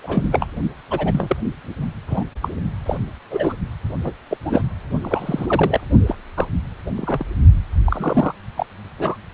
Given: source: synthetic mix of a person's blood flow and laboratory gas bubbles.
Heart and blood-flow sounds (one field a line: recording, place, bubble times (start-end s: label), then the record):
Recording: Doppler ultrasound of blood flow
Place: precordium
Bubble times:
0.04-0.28 s: bubbles
0.31-0.46 s: bubbles
0.90-1.37 s: bubbles
2.08-2.24 s: bubbles
2.42-2.48 s: bubbles
2.85-2.98 s: bubbles
3.30-3.54 s: bubbles
4.03-4.12 s: bubbles
4.30-4.37 s: bubbles
4.44-4.62 s: bubbles
5.02-5.80 s: bubbles
6.07-6.16 s: bubbles
6.36-6.45 s: bubbles
6.95-7.25 s: bubbles
7.85-8.33 s: bubbles
8.57-8.66 s: bubbles
8.98-9.17 s: bubbles
From the record:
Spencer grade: 3 (all of the cardiac periods contain showers or single bubble signals, but not dominating or overriding the cardiac motion signals)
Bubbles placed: only in the low amplitude regions of the cardiac cycle